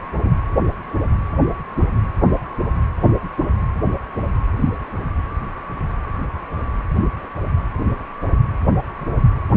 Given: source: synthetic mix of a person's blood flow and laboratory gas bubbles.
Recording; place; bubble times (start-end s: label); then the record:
Doppler ultrasound of blood flow; precordium
0.24-0.30 s: bubbles
From the record:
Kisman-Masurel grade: 112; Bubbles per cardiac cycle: 1 to 2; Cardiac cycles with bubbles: 1 to 10%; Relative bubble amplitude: moderate (0.250 to 0.450); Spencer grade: 1 (occasional bubble signal discernible with the cardiac motion signal, with majority of cardiac periods free of bubbles); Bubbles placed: anywhere in the cardiac cycle